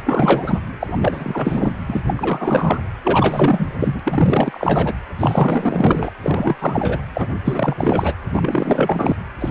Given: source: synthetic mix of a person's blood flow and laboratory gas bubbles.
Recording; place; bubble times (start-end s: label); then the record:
Doppler ultrasound of blood flow; precordium
0.06-0.60 s: bubbles
0.79-1.72 s: bubbles
1.86-2.01 s: bubbles
2.07-2.14 s: bubbles
2.17-2.79 s: bubbles
3.04-3.67 s: bubbles
3.75-4.00 s: bubbles
4.04-4.95 s: bubbles
5.19-6.11 s: bubbles
6.21-6.57 s: bubbles
6.61-7.01 s: bubbles
7.13-7.32 s: bubbles
7.45-7.75 s: bubbles
7.77-8.14 s: bubbles
8.33-9.16 s: bubbles
9.40-9.51 s: bubbles
From the record:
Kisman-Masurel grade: 444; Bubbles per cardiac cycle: continuous sound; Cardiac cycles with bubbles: 100%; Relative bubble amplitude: maximal (0.775 to 0.999); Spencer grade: 4 (maximum detectable bubble signal sounding continuously throughout systole and diastole of every cardiac period, and overriding the amplitude of the normal cardiac signals); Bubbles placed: anywhere in the cardiac cycle